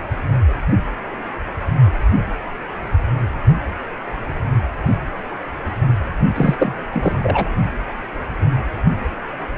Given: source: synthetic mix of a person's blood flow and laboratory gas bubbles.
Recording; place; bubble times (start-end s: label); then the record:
Doppler ultrasound of blood flow; precordium
6.34-6.55 s: bubbles
6.59-6.74 s: bubbles
6.92-7.49 s: bubbles
From the record:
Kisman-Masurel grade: 223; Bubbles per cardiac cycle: several, 3 to 8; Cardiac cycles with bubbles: 10 to 50%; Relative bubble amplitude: loud (0.450 to 0.775); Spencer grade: 2 (many but less than half of the cardiac periods contain bubble signals, singularly or in groups); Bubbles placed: only in the low amplitude regions of the cardiac cycle